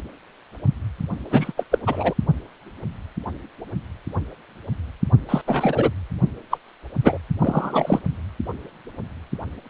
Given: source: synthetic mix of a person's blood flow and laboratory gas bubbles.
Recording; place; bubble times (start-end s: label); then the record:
Doppler ultrasound of blood flow; precordium
1.31-1.52 s: bubbles
1.57-1.64 s: bubbles
1.71-1.79 s: bubbles
1.86-2.13 s: bubbles
5.29-5.42 s: bubbles
5.46-5.92 s: bubbles
6.50-6.58 s: bubbles
7.03-7.20 s: bubbles
7.40-8.01 s: bubbles
From the record:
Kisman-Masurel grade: 223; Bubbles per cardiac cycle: several, 3 to 8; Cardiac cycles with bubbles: 10 to 50%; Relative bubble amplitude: loud (0.450 to 0.775); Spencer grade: 2 (many but less than half of the cardiac periods contain bubble signals, singularly or in groups); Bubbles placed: only in the low amplitude regions of the cardiac cycle